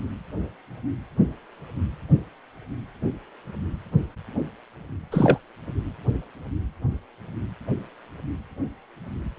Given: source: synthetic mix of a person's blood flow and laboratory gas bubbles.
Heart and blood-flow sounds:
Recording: Doppler ultrasound of blood flow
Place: precordium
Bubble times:
5.12-5.38 s: bubbles
From the record:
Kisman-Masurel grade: 122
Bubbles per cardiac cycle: 1 to 2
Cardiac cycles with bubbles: 10 to 50%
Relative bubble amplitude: moderate (0.250 to 0.450)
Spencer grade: 2 (many but less than half of the cardiac periods contain bubble signals, singularly or in groups)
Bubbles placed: anywhere in the cardiac cycle

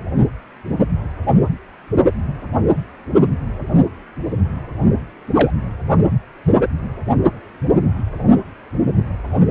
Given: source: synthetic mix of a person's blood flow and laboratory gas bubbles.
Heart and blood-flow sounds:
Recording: Doppler ultrasound of blood flow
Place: precordium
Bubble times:
5.34-5.51 s: bubbles
From the record:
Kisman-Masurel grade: 112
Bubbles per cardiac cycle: 1 to 2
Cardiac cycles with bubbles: 1 to 10%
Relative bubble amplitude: moderate (0.250 to 0.450)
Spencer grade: 1 (occasional bubble signal discernible with the cardiac motion signal, with majority of cardiac periods free of bubbles)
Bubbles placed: only in the low amplitude regions of the cardiac cycle

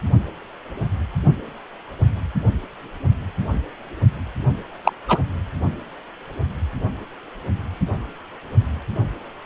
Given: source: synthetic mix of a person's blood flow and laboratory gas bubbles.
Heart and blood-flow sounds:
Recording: Doppler ultrasound of blood flow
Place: precordium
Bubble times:
4.83-4.93 s: bubbles
5.08-5.19 s: bubbles
From the record:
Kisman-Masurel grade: 113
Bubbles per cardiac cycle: 1 to 2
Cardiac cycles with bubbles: 1 to 10%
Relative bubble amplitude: loud (0.450 to 0.775)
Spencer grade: 1 (occasional bubble signal discernible with the cardiac motion signal, with majority of cardiac periods free of bubbles)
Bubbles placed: anywhere in the cardiac cycle

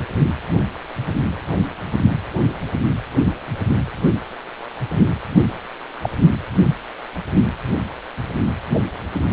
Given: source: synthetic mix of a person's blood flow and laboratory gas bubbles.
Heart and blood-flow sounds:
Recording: Doppler ultrasound of blood flow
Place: precordium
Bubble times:
6.02-6.09 s: bubbles
From the record:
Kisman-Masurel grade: 122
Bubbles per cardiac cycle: 1 to 2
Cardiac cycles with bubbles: 10 to 50%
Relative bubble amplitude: moderate (0.250 to 0.450)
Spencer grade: 2 (many but less than half of the cardiac periods contain bubble signals, singularly or in groups)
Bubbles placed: only in the low amplitude regions of the cardiac cycle

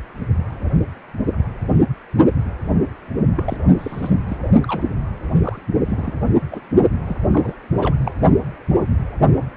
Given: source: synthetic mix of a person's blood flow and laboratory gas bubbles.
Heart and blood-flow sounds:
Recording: Doppler ultrasound of blood flow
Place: precordium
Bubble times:
3.35-3.57 s: bubbles
3.78-4.10 s: bubbles
4.28-4.38 s: bubbles
4.63-4.88 s: bubbles
5.42-5.59 s: bubbles
5.85-6.13 s: bubbles
6.51-6.60 s: bubbles
7.06-7.16 s: bubbles
7.32-7.54 s: bubbles
7.76-7.96 s: bubbles
8.04-8.12 s: bubbles
From the record:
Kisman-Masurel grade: 222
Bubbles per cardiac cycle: several, 3 to 8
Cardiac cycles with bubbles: 10 to 50%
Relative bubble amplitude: moderate (0.250 to 0.450)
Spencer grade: 2 (many but less than half of the cardiac periods contain bubble signals, singularly or in groups)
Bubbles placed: only in the low amplitude regions of the cardiac cycle

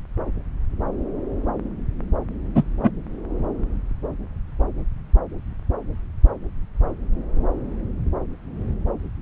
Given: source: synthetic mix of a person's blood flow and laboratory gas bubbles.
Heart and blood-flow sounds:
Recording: Doppler ultrasound of blood flow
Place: subclavian vein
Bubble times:
2.54-2.63 s: bubbles
2.83-2.90 s: bubbles
From the record:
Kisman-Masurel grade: 113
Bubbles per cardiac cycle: 1 to 2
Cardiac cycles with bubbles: 1 to 10%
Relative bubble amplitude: loud (0.450 to 0.775)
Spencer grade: 1 (occasional bubble signal discernible with the cardiac motion signal, with majority of cardiac periods free of bubbles)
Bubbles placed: anywhere in the cardiac cycle

